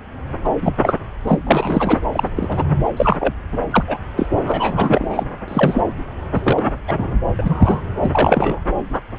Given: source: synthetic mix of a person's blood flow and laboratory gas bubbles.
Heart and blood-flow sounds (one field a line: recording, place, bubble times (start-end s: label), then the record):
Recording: Doppler ultrasound of blood flow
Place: subclavian vein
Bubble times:
0.44-0.49 s: bubbles
0.62-0.73 s: bubbles
0.82-0.96 s: bubbles
1.27-1.40 s: bubbles
1.47-1.99 s: bubbles
2.12-2.29 s: bubbles
2.35-2.64 s: bubbles
2.96-3.34 s: bubbles
3.52-3.58 s: bubbles
3.71-3.84 s: bubbles
3.88-3.97 s: bubbles
4.17-4.27 s: bubbles
4.47-5.25 s: bubbles
5.47-5.81 s: bubbles
6.33-6.62 s: bubbles
6.88-7.18 s: bubbles
7.39-7.81 s: bubbles
8.02-8.62 s: bubbles
From the record:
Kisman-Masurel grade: 233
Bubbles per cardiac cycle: several, 3 to 8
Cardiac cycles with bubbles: 50 to 99%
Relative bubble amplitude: loud (0.450 to 0.775)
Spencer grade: 3 (all of the cardiac periods contain showers or single bubble signals, but not dominating or overriding the cardiac motion signals)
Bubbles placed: anywhere in the cardiac cycle